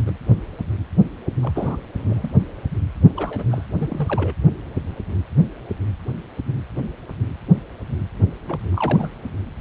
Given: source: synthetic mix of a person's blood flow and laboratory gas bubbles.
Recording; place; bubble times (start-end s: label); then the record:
Doppler ultrasound of blood flow; precordium
0.00-0.02 s: bubbles
0.06-0.12 s: bubbles
1.43-1.77 s: bubbles
1.96-2.31 s: bubbles
3.15-3.65 s: bubbles
3.78-4.33 s: bubbles
8.47-8.60 s: bubbles
8.73-9.12 s: bubbles
From the record:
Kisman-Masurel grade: 221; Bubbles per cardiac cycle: several, 3 to 8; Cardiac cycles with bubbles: 10 to 50%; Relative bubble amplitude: barely perceptible (0.100 to 0.250); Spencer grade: 2 (many but less than half of the cardiac periods contain bubble signals, singularly or in groups); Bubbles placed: anywhere in the cardiac cycle